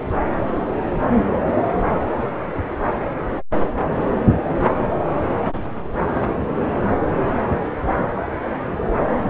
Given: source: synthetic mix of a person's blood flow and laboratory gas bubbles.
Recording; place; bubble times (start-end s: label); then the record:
Doppler ultrasound of blood flow; subclavian vein
no bubbles
From the record:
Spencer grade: 0 (complete lack of bubble signals)